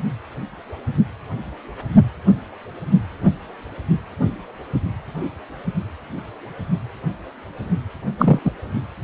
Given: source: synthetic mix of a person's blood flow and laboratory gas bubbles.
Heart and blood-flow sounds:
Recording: Doppler ultrasound of blood flow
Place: precordium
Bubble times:
8.17-8.39 s: bubbles
8.44-8.51 s: bubbles
From the record:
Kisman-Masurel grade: 213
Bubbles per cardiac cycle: several, 3 to 8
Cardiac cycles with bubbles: 1 to 10%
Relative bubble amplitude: loud (0.450 to 0.775)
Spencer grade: 1 (occasional bubble signal discernible with the cardiac motion signal, with majority of cardiac periods free of bubbles)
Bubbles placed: only in the low amplitude regions of the cardiac cycle

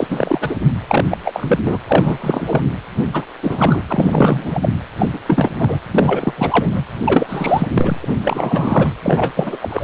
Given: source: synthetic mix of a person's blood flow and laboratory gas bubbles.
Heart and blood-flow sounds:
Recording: Doppler ultrasound of blood flow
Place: precordium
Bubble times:
0.00-0.57 s: bubbles
0.88-1.04 s: bubbles
1.08-1.17 s: bubbles
1.24-1.81 s: bubbles
1.87-2.62 s: bubbles
2.97-3.07 s: bubbles
3.13-3.26 s: bubbles
3.43-3.82 s: bubbles
3.87-4.69 s: bubbles
4.98-5.09 s: bubbles
5.13-5.18 s: bubbles
5.26-5.79 s: bubbles
5.91-6.33 s: bubbles
6.36-6.84 s: bubbles
7.05-7.67 s: bubbles
7.74-7.97 s: bubbles
8.02-8.93 s: bubbles
9.03-9.32 s: bubbles
9.36-9.57 s: bubbles
9.62-9.84 s: bubbles
From the record:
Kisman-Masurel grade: 343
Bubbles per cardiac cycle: rolling drumbeat, 9 or more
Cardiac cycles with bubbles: 100%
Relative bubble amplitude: loud (0.450 to 0.775)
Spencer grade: 3 (all of the cardiac periods contain showers or single bubble signals, but not dominating or overriding the cardiac motion signals)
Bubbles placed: anywhere in the cardiac cycle

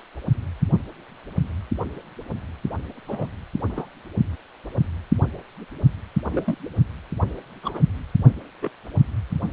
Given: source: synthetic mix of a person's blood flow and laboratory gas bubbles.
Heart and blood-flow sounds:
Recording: Doppler ultrasound of blood flow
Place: precordium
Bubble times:
3.08-3.27 s: bubbles
3.70-3.88 s: bubbles
6.30-6.58 s: bubbles
7.62-7.79 s: bubbles
8.62-8.70 s: bubbles
From the record:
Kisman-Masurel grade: 121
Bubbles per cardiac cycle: 1 to 2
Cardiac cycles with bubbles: 10 to 50%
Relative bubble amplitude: barely perceptible (0.100 to 0.250)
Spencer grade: 2 (many but less than half of the cardiac periods contain bubble signals, singularly or in groups)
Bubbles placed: only in the low amplitude regions of the cardiac cycle

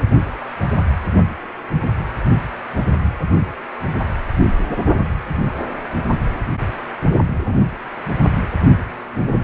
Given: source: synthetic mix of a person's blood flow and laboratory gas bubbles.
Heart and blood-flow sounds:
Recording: Doppler ultrasound of blood flow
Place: precordium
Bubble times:
no bubbles
From the record:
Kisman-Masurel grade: 000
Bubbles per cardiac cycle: 0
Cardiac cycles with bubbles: 0%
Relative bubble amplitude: no bubbles discernible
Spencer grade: 0 (complete lack of bubble signals)

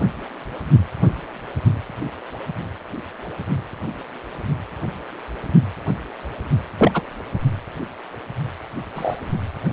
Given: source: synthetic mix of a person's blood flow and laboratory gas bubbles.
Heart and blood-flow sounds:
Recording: Doppler ultrasound of blood flow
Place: precordium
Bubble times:
6.78-6.91 s: bubbles
6.93-7.02 s: bubbles
8.95-9.16 s: bubbles
From the record:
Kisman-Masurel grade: 123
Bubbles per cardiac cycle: 1 to 2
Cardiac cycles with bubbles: 10 to 50%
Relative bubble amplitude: loud (0.450 to 0.775)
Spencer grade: 2 (many but less than half of the cardiac periods contain bubble signals, singularly or in groups)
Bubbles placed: only in the low amplitude regions of the cardiac cycle

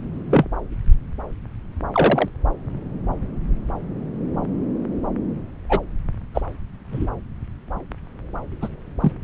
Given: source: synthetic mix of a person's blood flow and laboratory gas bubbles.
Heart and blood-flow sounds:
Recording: Doppler ultrasound of blood flow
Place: subclavian vein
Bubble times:
0.30-0.46 s: bubbles
1.92-2.29 s: bubbles
5.69-5.81 s: bubbles
6.34-6.41 s: bubbles
6.92-7.07 s: bubbles
8.61-8.68 s: bubbles
9.00-9.12 s: bubbles
From the record:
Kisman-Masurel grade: 123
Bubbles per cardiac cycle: 1 to 2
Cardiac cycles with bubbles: 10 to 50%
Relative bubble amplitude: loud (0.450 to 0.775)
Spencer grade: 2 (many but less than half of the cardiac periods contain bubble signals, singularly or in groups)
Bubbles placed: anywhere in the cardiac cycle

